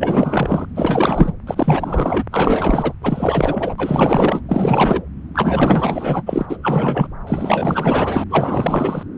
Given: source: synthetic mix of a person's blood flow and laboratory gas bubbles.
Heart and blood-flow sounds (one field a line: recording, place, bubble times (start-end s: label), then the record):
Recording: Doppler ultrasound of blood flow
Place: subclavian vein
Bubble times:
0.00-0.68 s: bubbles
0.75-1.32 s: bubbles
1.47-2.23 s: bubbles
2.31-2.93 s: bubbles
3.03-3.75 s: bubbles
3.78-4.42 s: bubbles
4.48-5.02 s: bubbles
5.33-6.23 s: bubbles
6.26-6.46 s: bubbles
6.49-6.57 s: bubbles
6.62-7.08 s: bubbles
7.27-8.24 s: bubbles
8.30-9.03 s: bubbles
From the record:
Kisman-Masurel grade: 444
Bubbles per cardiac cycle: continuous sound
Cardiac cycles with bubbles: 100%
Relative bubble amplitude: maximal (0.775 to 0.999)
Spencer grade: 4 (maximum detectable bubble signal sounding continuously throughout systole and diastole of every cardiac period, and overriding the amplitude of the normal cardiac signals)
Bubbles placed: anywhere in the cardiac cycle